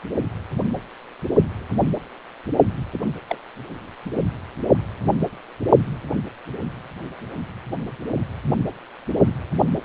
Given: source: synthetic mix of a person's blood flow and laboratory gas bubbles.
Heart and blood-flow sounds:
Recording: Doppler ultrasound of blood flow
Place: precordium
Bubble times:
2.93-2.99 s: bubbles
3.27-3.38 s: bubbles
From the record:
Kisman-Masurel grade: 111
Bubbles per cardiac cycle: 1 to 2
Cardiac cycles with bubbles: 1 to 10%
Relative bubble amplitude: barely perceptible (0.100 to 0.250)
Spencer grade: 1 (occasional bubble signal discernible with the cardiac motion signal, with majority of cardiac periods free of bubbles)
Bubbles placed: only in the low amplitude regions of the cardiac cycle

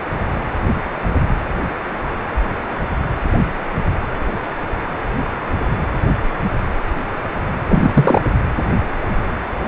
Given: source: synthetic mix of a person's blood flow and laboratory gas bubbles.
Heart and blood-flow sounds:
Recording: Doppler ultrasound of blood flow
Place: precordium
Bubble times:
7.68-8.21 s: bubbles
From the record:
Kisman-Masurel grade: 213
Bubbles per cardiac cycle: several, 3 to 8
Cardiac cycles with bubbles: 1 to 10%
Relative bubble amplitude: loud (0.450 to 0.775)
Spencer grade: 1 (occasional bubble signal discernible with the cardiac motion signal, with majority of cardiac periods free of bubbles)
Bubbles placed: anywhere in the cardiac cycle

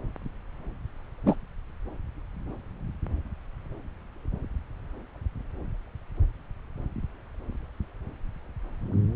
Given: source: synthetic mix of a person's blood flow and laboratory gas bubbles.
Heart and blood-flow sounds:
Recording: Doppler ultrasound of blood flow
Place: subclavian vein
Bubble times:
1.26-1.35 s: bubbles
From the record:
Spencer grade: 1 (occasional bubble signal discernible with the cardiac motion signal, with majority of cardiac periods free of bubbles)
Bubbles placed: anywhere in the cardiac cycle

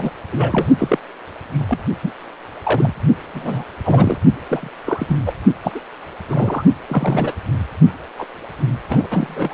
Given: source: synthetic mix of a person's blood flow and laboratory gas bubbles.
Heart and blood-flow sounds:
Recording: Doppler ultrasound of blood flow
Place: precordium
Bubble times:
0.00-0.11 s: bubbles
0.31-0.66 s: bubbles
0.77-0.98 s: bubbles
1.50-1.85 s: bubbles
2.03-2.12 s: bubbles
2.64-2.94 s: bubbles
3.33-3.64 s: bubbles
3.83-4.17 s: bubbles
4.46-4.69 s: bubbles
4.85-5.17 s: bubbles
5.26-5.33 s: bubbles
5.63-5.71 s: bubbles
5.74-5.80 s: bubbles
6.29-6.63 s: bubbles
6.88-7.33 s: bubbles
8.18-8.25 s: bubbles
8.88-9.07 s: bubbles
9.10-9.54 s: bubbles
From the record:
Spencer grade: 3 (all of the cardiac periods contain showers or single bubble signals, but not dominating or overriding the cardiac motion signals)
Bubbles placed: only in the low amplitude regions of the cardiac cycle

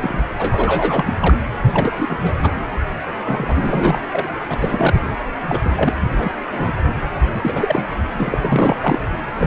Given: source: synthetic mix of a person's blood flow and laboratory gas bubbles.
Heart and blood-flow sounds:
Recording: Doppler ultrasound of blood flow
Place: precordium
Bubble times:
0.00-0.24 s: bubbles
0.38-1.14 s: bubbles
1.20-1.34 s: bubbles
1.66-2.35 s: bubbles
2.42-2.51 s: bubbles
3.25-4.01 s: bubbles
4.12-4.29 s: bubbles
4.47-4.94 s: bubbles
5.47-5.60 s: bubbles
5.65-5.71 s: bubbles
5.73-5.93 s: bubbles
6.16-6.31 s: bubbles
6.52-6.72 s: bubbles
7.44-7.87 s: bubbles
8.12-8.75 s: bubbles
8.81-8.99 s: bubbles
9.37-9.47 s: bubbles
From the record:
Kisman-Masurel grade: 342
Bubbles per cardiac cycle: rolling drumbeat, 9 or more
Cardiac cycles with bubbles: 100%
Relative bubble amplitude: moderate (0.250 to 0.450)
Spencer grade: 3 (all of the cardiac periods contain showers or single bubble signals, but not dominating or overriding the cardiac motion signals)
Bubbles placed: anywhere in the cardiac cycle

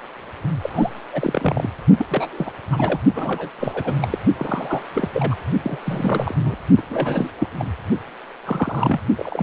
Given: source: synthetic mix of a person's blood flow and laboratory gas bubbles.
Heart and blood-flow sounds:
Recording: Doppler ultrasound of blood flow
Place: precordium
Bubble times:
0.61-0.89 s: bubbles
1.12-1.70 s: bubbles
1.97-2.06 s: bubbles
2.08-2.52 s: bubbles
2.65-3.00 s: bubbles
3.13-3.49 s: bubbles
3.60-3.94 s: bubbles
4.01-4.18 s: bubbles
4.36-4.83 s: bubbles
4.94-5.10 s: bubbles
5.13-5.35 s: bubbles
5.62-5.79 s: bubbles
5.85-6.34 s: bubbles
6.39-6.56 s: bubbles
6.77-6.82 s: bubbles
6.89-7.30 s: bubbles
7.39-7.49 s: bubbles
7.58-7.65 s: bubbles
8.45-9.00 s: bubbles
9.15-9.42 s: bubbles
From the record:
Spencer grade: 3 (all of the cardiac periods contain showers or single bubble signals, but not dominating or overriding the cardiac motion signals)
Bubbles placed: only in the low amplitude regions of the cardiac cycle

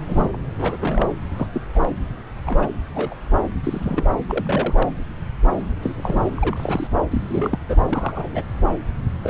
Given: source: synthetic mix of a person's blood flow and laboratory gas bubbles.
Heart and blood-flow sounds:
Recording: Doppler ultrasound of blood flow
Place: subclavian vein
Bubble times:
0.06-0.36 s: bubbles
0.58-0.77 s: bubbles
0.80-1.09 s: bubbles
1.36-1.47 s: bubbles
1.53-1.62 s: bubbles
1.75-1.89 s: bubbles
2.46-2.70 s: bubbles
2.73-2.79 s: bubbles
2.94-3.15 s: bubbles
3.63-4.07 s: bubbles
4.29-4.89 s: bubbles
5.82-6.30 s: bubbles
6.37-6.87 s: bubbles
7.11-7.58 s: bubbles
7.67-7.76 s: bubbles
7.89-8.42 s: bubbles
9.23-9.30 s: bubbles
From the record:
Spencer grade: 3 (all of the cardiac periods contain showers or single bubble signals, but not dominating or overriding the cardiac motion signals)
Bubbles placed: anywhere in the cardiac cycle

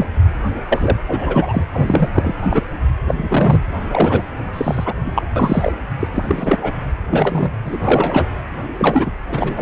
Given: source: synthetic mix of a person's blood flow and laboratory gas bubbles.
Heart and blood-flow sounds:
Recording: Doppler ultrasound of blood flow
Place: precordium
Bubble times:
0.00-0.07 s: bubbles
0.68-0.97 s: bubbles
1.07-1.65 s: bubbles
1.72-2.08 s: bubbles
2.14-2.35 s: bubbles
2.42-2.47 s: bubbles
2.50-2.62 s: bubbles
3.06-3.60 s: bubbles
3.73-4.23 s: bubbles
4.53-4.94 s: bubbles
5.05-5.23 s: bubbles
5.36-5.72 s: bubbles
6.00-6.08 s: bubbles
6.15-6.57 s: bubbles
6.62-6.74 s: bubbles
7.10-7.51 s: bubbles
7.65-7.78 s: bubbles
7.84-8.27 s: bubbles
8.78-9.12 s: bubbles
9.29-9.62 s: bubbles
From the record:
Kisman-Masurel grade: 243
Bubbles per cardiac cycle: several, 3 to 8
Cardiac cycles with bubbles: 100%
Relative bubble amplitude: loud (0.450 to 0.775)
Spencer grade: 3 (all of the cardiac periods contain showers or single bubble signals, but not dominating or overriding the cardiac motion signals)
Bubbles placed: anywhere in the cardiac cycle

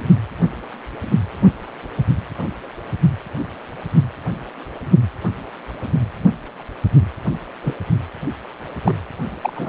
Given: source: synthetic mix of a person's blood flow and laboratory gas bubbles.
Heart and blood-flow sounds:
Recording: Doppler ultrasound of blood flow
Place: precordium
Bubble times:
7.62-7.74 s: bubbles
8.83-8.93 s: bubbles
9.41-9.53 s: bubbles
9.55-9.69 s: bubbles
From the record:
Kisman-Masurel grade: 122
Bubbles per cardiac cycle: 1 to 2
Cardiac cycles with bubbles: 10 to 50%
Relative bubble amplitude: moderate (0.250 to 0.450)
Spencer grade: 2 (many but less than half of the cardiac periods contain bubble signals, singularly or in groups)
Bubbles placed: anywhere in the cardiac cycle

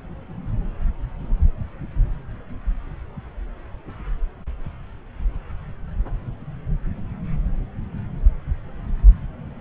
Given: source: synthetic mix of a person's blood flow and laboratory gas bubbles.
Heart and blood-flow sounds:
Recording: Doppler ultrasound of blood flow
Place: subclavian vein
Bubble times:
no bubbles
From the record:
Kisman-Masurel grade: 000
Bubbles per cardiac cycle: 0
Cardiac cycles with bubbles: 0%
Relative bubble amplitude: no bubbles discernible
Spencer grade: 0 (complete lack of bubble signals)

